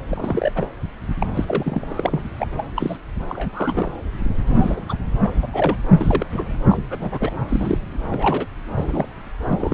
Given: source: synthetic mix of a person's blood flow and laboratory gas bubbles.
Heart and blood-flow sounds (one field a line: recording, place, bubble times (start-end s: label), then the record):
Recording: Doppler ultrasound of blood flow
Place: subclavian vein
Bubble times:
0.08-0.52 s: bubbles
0.55-0.68 s: bubbles
1.19-1.26 s: bubbles
1.33-1.45 s: bubbles
1.47-2.23 s: bubbles
2.39-2.47 s: bubbles
2.57-2.72 s: bubbles
2.76-2.97 s: bubbles
3.29-3.92 s: bubbles
4.46-4.80 s: bubbles
4.89-4.95 s: bubbles
5.23-5.31 s: bubbles
5.42-5.46 s: bubbles
5.53-5.76 s: bubbles
5.98-6.25 s: bubbles
6.31-6.57 s: bubbles
6.68-6.79 s: bubbles
6.89-7.32 s: bubbles
7.48-7.94 s: bubbles
8.02-8.46 s: bubbles
8.77-9.08 s: bubbles
9.53-9.74 s: bubbles
From the record:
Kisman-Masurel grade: 242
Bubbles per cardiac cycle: several, 3 to 8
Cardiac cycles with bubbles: 100%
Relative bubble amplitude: moderate (0.250 to 0.450)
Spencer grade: 3 (all of the cardiac periods contain showers or single bubble signals, but not dominating or overriding the cardiac motion signals)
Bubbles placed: anywhere in the cardiac cycle